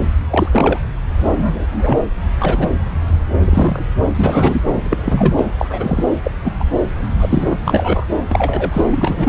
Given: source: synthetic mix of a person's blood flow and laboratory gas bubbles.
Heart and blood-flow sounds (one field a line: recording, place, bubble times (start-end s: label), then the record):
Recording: Doppler ultrasound of blood flow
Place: subclavian vein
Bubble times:
0.30-0.48 s: bubbles
0.51-0.79 s: bubbles
1.28-1.98 s: bubbles
2.39-2.69 s: bubbles
3.42-3.84 s: bubbles
4.14-4.62 s: bubbles
4.84-5.47 s: bubbles
5.58-6.04 s: bubbles
6.24-6.32 s: bubbles
6.44-6.51 s: bubbles
6.59-6.64 s: bubbles
7.18-7.58 s: bubbles
7.65-8.05 s: bubbles
8.31-8.84 s: bubbles
8.91-9.29 s: bubbles
From the record:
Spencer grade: 3 (all of the cardiac periods contain showers or single bubble signals, but not dominating or overriding the cardiac motion signals)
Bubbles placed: anywhere in the cardiac cycle